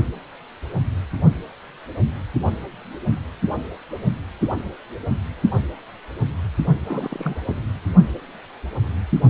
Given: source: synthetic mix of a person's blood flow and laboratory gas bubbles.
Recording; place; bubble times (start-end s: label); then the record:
Doppler ultrasound of blood flow; precordium
6.86-7.35 s: bubbles
7.46-7.55 s: bubbles
From the record:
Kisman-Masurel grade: 211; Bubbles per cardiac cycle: several, 3 to 8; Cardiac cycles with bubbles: 1 to 10%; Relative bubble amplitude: barely perceptible (0.100 to 0.250); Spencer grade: 1 (occasional bubble signal discernible with the cardiac motion signal, with majority of cardiac periods free of bubbles); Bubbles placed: only in the low amplitude regions of the cardiac cycle